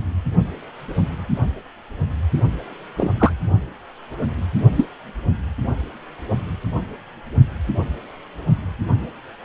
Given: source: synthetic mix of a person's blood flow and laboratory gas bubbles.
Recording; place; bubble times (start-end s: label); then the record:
Doppler ultrasound of blood flow; precordium
2.96-3.11 s: bubbles
3.19-3.31 s: bubbles
4.75-4.85 s: bubbles
From the record:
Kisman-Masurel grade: 123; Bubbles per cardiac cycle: 1 to 2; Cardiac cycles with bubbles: 10 to 50%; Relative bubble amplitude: loud (0.450 to 0.775); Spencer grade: 2 (many but less than half of the cardiac periods contain bubble signals, singularly or in groups); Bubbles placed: only in the low amplitude regions of the cardiac cycle